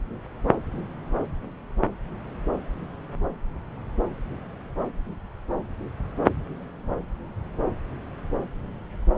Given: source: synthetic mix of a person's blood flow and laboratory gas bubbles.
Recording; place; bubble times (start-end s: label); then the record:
Doppler ultrasound of blood flow; subclavian vein
no bubbles
From the record:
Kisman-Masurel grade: 000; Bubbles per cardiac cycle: 0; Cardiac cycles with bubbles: 0%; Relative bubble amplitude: no bubbles discernible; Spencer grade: 0 (complete lack of bubble signals)